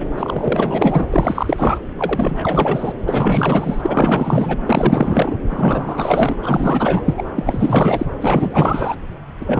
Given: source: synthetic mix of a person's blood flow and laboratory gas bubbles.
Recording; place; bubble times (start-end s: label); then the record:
Doppler ultrasound of blood flow; subclavian vein
0.16-1.07 s: bubbles
1.12-1.78 s: bubbles
1.98-2.93 s: bubbles
3.08-4.58 s: bubbles
4.65-5.38 s: bubbles
5.50-6.37 s: bubbles
6.42-7.15 s: bubbles
7.17-7.24 s: bubbles
7.34-8.06 s: bubbles
8.21-8.96 s: bubbles
9.40-9.59 s: bubbles
From the record:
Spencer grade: 4 (maximum detectable bubble signal sounding continuously throughout systole and diastole of every cardiac period, and overriding the amplitude of the normal cardiac signals); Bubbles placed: anywhere in the cardiac cycle